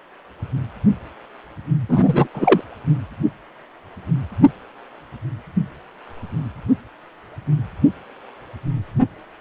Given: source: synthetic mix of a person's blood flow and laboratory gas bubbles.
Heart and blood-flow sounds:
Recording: Doppler ultrasound of blood flow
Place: precordium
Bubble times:
1.89-2.28 s: bubbles
2.34-2.61 s: bubbles
From the record:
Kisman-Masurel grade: 213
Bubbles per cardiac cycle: several, 3 to 8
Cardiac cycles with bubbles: 1 to 10%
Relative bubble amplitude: loud (0.450 to 0.775)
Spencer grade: 1 (occasional bubble signal discernible with the cardiac motion signal, with majority of cardiac periods free of bubbles)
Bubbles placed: anywhere in the cardiac cycle

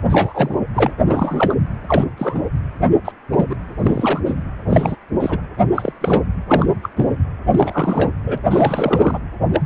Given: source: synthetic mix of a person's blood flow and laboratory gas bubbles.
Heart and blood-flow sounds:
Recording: Doppler ultrasound of blood flow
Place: precordium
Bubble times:
0.09-0.59 s: bubbles
0.74-0.91 s: bubbles
1.06-1.55 s: bubbles
1.88-2.04 s: bubbles
2.17-2.42 s: bubbles
3.04-3.12 s: bubbles
3.31-3.44 s: bubbles
3.49-3.56 s: bubbles
3.79-4.22 s: bubbles
4.25-4.35 s: bubbles
4.69-4.96 s: bubbles
5.20-5.40 s: bubbles
5.75-5.93 s: bubbles
6.01-6.22 s: bubbles
6.50-6.72 s: bubbles
6.82-6.90 s: bubbles
6.96-7.09 s: bubbles
7.52-8.11 s: bubbles
8.26-8.38 s: bubbles
8.50-9.20 s: bubbles
9.40-9.46 s: bubbles
9.53-9.60 s: bubbles
From the record:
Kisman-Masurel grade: 243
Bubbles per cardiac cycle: several, 3 to 8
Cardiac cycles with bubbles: 100%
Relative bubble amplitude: loud (0.450 to 0.775)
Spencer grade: 3 (all of the cardiac periods contain showers or single bubble signals, but not dominating or overriding the cardiac motion signals)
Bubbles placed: anywhere in the cardiac cycle

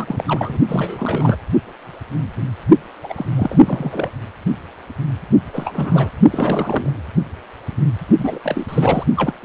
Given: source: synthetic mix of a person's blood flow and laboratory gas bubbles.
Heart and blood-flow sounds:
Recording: Doppler ultrasound of blood flow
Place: precordium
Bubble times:
0.00-0.24 s: bubbles
0.27-0.58 s: bubbles
0.68-1.36 s: bubbles
3.03-3.25 s: bubbles
3.36-3.59 s: bubbles
3.63-4.12 s: bubbles
5.53-6.10 s: bubbles
6.30-6.92 s: bubbles
8.17-8.39 s: bubbles
8.43-9.04 s: bubbles
9.16-9.33 s: bubbles
9.42-9.45 s: bubbles
From the record:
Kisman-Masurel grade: 332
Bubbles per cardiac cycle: rolling drumbeat, 9 or more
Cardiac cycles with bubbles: 50 to 99%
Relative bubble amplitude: moderate (0.250 to 0.450)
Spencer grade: 3 (all of the cardiac periods contain showers or single bubble signals, but not dominating or overriding the cardiac motion signals)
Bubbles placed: only in the low amplitude regions of the cardiac cycle

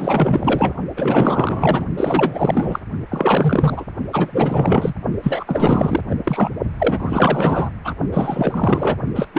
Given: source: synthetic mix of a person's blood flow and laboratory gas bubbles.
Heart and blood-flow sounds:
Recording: Doppler ultrasound of blood flow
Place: precordium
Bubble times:
0.00-0.73 s: bubbles
0.96-1.85 s: bubbles
1.97-2.79 s: bubbles
3.08-3.84 s: bubbles
4.12-4.94 s: bubbles
5.23-6.00 s: bubbles
6.09-6.16 s: bubbles
6.24-6.57 s: bubbles
6.78-7.70 s: bubbles
7.84-7.94 s: bubbles
8.12-8.96 s: bubbles
9.14-9.27 s: bubbles
9.34-9.39 s: bubbles
From the record:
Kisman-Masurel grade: 444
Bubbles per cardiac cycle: continuous sound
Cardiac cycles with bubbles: 100%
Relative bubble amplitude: maximal (0.775 to 0.999)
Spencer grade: 4 (maximum detectable bubble signal sounding continuously throughout systole and diastole of every cardiac period, and overriding the amplitude of the normal cardiac signals)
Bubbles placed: only in the low amplitude regions of the cardiac cycle

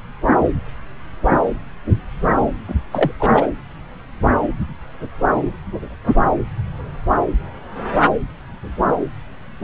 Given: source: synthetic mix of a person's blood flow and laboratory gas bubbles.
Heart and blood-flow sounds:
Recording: Doppler ultrasound of blood flow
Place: subclavian vein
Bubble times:
2.68-2.75 s: bubbles
2.92-3.12 s: bubbles
3.20-3.48 s: bubbles
From the record:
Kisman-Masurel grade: 212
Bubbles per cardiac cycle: several, 3 to 8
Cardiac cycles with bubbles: 1 to 10%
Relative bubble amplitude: moderate (0.250 to 0.450)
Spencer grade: 1 (occasional bubble signal discernible with the cardiac motion signal, with majority of cardiac periods free of bubbles)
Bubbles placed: anywhere in the cardiac cycle

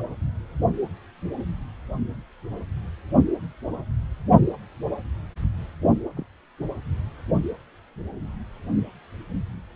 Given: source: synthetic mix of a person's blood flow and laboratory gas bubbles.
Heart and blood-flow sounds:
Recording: Doppler ultrasound of blood flow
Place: precordium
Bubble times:
6.16-6.24 s: bubbles
From the record:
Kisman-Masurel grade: 111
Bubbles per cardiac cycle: 1 to 2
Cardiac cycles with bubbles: 1 to 10%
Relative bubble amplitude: barely perceptible (0.100 to 0.250)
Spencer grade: 1 (occasional bubble signal discernible with the cardiac motion signal, with majority of cardiac periods free of bubbles)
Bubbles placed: only in the low amplitude regions of the cardiac cycle

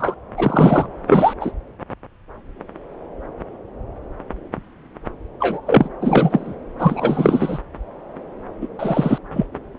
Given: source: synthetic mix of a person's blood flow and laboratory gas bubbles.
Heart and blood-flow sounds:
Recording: Doppler ultrasound of blood flow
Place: subclavian vein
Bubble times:
0.00-0.14 s: bubbles
0.37-0.86 s: bubbles
1.08-1.33 s: bubbles
1.41-1.51 s: bubbles
5.40-5.60 s: bubbles
5.67-5.89 s: bubbles
6.01-6.55 s: bubbles
6.79-7.59 s: bubbles
8.61-8.68 s: bubbles
8.79-9.19 s: bubbles
9.34-9.46 s: bubbles
From the record:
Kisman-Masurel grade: 233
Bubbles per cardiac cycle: several, 3 to 8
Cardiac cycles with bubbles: 50 to 99%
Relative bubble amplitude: loud (0.450 to 0.775)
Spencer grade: 3 (all of the cardiac periods contain showers or single bubble signals, but not dominating or overriding the cardiac motion signals)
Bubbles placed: anywhere in the cardiac cycle

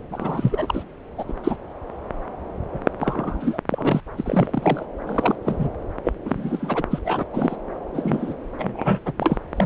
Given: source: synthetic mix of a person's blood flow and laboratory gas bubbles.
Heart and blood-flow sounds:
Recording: Doppler ultrasound of blood flow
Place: subclavian vein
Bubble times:
0.11-0.83 s: bubbles
1.18-1.24 s: bubbles
1.27-1.34 s: bubbles
1.44-1.56 s: bubbles
2.73-2.79 s: bubbles
3.00-3.59 s: bubbles
3.70-4.01 s: bubbles
4.17-4.86 s: bubbles
5.07-5.36 s: bubbles
5.45-5.69 s: bubbles
6.05-6.12 s: bubbles
6.25-6.85 s: bubbles
6.91-6.99 s: bubbles
7.05-7.25 s: bubbles
7.33-7.56 s: bubbles
7.94-8.34 s: bubbles
8.57-8.99 s: bubbles
9.05-9.12 s: bubbles
9.18-9.38 s: bubbles
9.56-9.66 s: bubbles
From the record:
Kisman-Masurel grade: 242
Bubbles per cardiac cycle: several, 3 to 8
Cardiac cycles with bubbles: 100%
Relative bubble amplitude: moderate (0.250 to 0.450)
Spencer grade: 3 (all of the cardiac periods contain showers or single bubble signals, but not dominating or overriding the cardiac motion signals)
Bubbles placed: anywhere in the cardiac cycle

